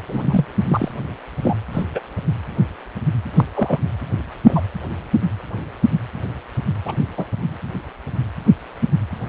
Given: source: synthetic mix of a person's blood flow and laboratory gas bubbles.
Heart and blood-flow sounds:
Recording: Doppler ultrasound of blood flow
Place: precordium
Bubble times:
0.08-0.45 s: bubbles
0.69-0.91 s: bubbles
1.42-1.56 s: bubbles
1.73-1.83 s: bubbles
1.95-2.00 s: bubbles
3.37-3.45 s: bubbles
3.54-3.80 s: bubbles
4.47-4.60 s: bubbles
6.85-6.94 s: bubbles
7.17-7.25 s: bubbles
From the record:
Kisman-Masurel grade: 122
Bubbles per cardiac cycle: 1 to 2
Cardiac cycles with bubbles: 10 to 50%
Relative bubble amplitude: moderate (0.250 to 0.450)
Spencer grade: 2 (many but less than half of the cardiac periods contain bubble signals, singularly or in groups)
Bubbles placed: anywhere in the cardiac cycle

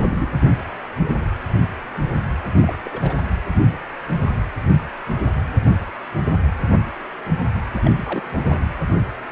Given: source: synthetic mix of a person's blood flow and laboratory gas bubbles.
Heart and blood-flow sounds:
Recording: Doppler ultrasound of blood flow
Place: precordium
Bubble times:
0.10-0.27 s: bubbles
2.62-2.77 s: bubbles
2.83-3.15 s: bubbles
7.72-8.32 s: bubbles
8.44-8.66 s: bubbles
From the record:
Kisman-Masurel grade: 221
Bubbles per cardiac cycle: several, 3 to 8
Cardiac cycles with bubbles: 10 to 50%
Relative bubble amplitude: barely perceptible (0.100 to 0.250)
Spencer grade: 2 (many but less than half of the cardiac periods contain bubble signals, singularly or in groups)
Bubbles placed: anywhere in the cardiac cycle

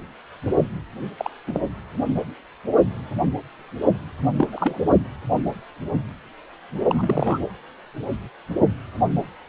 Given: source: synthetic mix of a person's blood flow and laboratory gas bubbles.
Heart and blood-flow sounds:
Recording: Doppler ultrasound of blood flow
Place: precordium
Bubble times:
1.18-1.30 s: bubbles
1.47-1.61 s: bubbles
4.37-4.48 s: bubbles
4.53-4.81 s: bubbles
6.88-7.38 s: bubbles
From the record:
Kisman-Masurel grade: 222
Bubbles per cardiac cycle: several, 3 to 8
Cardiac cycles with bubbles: 10 to 50%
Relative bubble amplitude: moderate (0.250 to 0.450)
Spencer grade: 2 (many but less than half of the cardiac periods contain bubble signals, singularly or in groups)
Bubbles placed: anywhere in the cardiac cycle

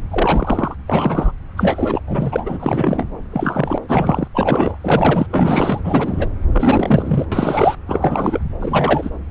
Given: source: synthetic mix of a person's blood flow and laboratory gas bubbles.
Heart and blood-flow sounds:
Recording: Doppler ultrasound of blood flow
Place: subclavian vein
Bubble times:
0.11-0.75 s: bubbles
0.87-1.32 s: bubbles
1.57-2.00 s: bubbles
2.07-2.57 s: bubbles
2.60-3.05 s: bubbles
3.31-3.78 s: bubbles
3.88-4.28 s: bubbles
4.34-4.78 s: bubbles
4.81-5.27 s: bubbles
5.29-6.28 s: bubbles
6.52-7.26 s: bubbles
7.32-7.75 s: bubbles
7.86-8.44 s: bubbles
8.58-9.10 s: bubbles
From the record:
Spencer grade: 3 (all of the cardiac periods contain showers or single bubble signals, but not dominating or overriding the cardiac motion signals)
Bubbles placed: anywhere in the cardiac cycle

